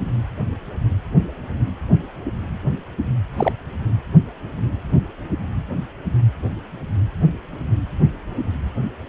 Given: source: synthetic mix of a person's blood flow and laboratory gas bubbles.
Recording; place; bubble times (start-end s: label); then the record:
Doppler ultrasound of blood flow; precordium
3.37-3.52 s: bubbles
From the record:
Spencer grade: 1 (occasional bubble signal discernible with the cardiac motion signal, with majority of cardiac periods free of bubbles); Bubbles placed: anywhere in the cardiac cycle